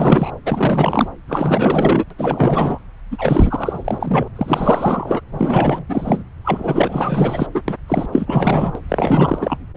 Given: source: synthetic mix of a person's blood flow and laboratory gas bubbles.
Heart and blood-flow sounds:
Doppler ultrasound of blood flow; subclavian vein
0.00-0.31 s: bubbles
0.45-1.08 s: bubbles
1.28-2.04 s: bubbles
2.10-2.14 s: bubbles
2.18-2.79 s: bubbles
3.11-4.28 s: bubbles
4.36-5.21 s: bubbles
5.32-5.85 s: bubbles
5.88-6.24 s: bubbles
6.44-7.46 s: bubbles
7.54-7.62 s: bubbles
7.68-7.75 s: bubbles
7.88-8.08 s: bubbles
8.12-8.79 s: bubbles
8.88-9.58 s: bubbles
From the record:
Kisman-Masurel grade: 444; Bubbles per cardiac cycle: continuous sound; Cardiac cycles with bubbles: 100%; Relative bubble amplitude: maximal (0.775 to 0.999); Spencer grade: 4 (maximum detectable bubble signal sounding continuously throughout systole and diastole of every cardiac period, and overriding the amplitude of the normal cardiac signals); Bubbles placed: anywhere in the cardiac cycle

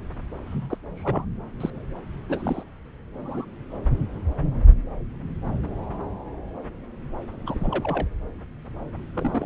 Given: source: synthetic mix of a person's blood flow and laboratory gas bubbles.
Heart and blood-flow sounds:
Doppler ultrasound of blood flow; subclavian vein
0.46-0.77 s: bubbles
0.97-1.25 s: bubbles
1.60-1.70 s: bubbles
2.29-2.63 s: bubbles
3.21-3.45 s: bubbles
7.46-8.08 s: bubbles
9.13-9.46 s: bubbles
From the record:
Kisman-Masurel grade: 221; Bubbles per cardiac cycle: several, 3 to 8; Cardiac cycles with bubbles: 10 to 50%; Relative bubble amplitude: barely perceptible (0.100 to 0.250); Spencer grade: 2 (many but less than half of the cardiac periods contain bubble signals, singularly or in groups); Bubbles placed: anywhere in the cardiac cycle

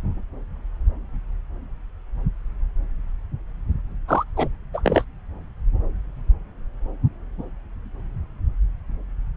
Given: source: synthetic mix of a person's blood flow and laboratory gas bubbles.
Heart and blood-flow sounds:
Doppler ultrasound of blood flow; subclavian vein
4.08-4.24 s: bubbles
4.37-4.48 s: bubbles
4.74-4.81 s: bubbles
4.83-5.04 s: bubbles
From the record:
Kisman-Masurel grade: 212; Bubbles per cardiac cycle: several, 3 to 8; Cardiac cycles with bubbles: 1 to 10%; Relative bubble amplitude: moderate (0.250 to 0.450); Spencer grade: 1 (occasional bubble signal discernible with the cardiac motion signal, with majority of cardiac periods free of bubbles); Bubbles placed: anywhere in the cardiac cycle

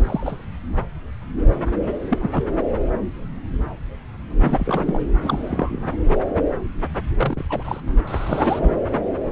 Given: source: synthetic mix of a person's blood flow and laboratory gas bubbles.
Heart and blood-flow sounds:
Doppler ultrasound of blood flow; subclavian vein
0.00-0.45 s: bubbles
2.09-2.44 s: bubbles
4.40-5.00 s: bubbles
5.22-5.84 s: bubbles
7.17-7.42 s: bubbles
7.49-7.81 s: bubbles
8.07-8.73 s: bubbles
From the record:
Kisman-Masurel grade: 222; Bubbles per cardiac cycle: several, 3 to 8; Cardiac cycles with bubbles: 10 to 50%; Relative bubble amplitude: moderate (0.250 to 0.450); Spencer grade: 2 (many but less than half of the cardiac periods contain bubble signals, singularly or in groups); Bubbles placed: anywhere in the cardiac cycle

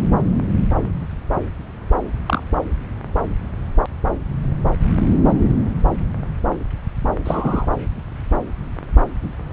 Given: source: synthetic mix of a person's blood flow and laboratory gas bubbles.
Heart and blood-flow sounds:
Doppler ultrasound of blood flow; subclavian vein
2.26-2.41 s: bubbles
7.25-7.66 s: bubbles
From the record:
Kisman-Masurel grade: 123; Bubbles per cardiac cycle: 1 to 2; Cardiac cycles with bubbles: 10 to 50%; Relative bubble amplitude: loud (0.450 to 0.775); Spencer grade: 2 (many but less than half of the cardiac periods contain bubble signals, singularly or in groups); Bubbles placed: anywhere in the cardiac cycle

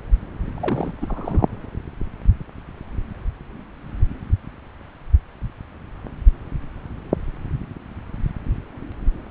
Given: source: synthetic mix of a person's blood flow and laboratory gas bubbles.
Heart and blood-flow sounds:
Doppler ultrasound of blood flow; subclavian vein
0.55-0.94 s: bubbles
1.00-1.06 s: bubbles
1.08-1.46 s: bubbles
From the record:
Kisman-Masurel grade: 211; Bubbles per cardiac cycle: several, 3 to 8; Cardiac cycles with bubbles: 1 to 10%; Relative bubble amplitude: barely perceptible (0.100 to 0.250); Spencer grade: 1 (occasional bubble signal discernible with the cardiac motion signal, with majority of cardiac periods free of bubbles); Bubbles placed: anywhere in the cardiac cycle

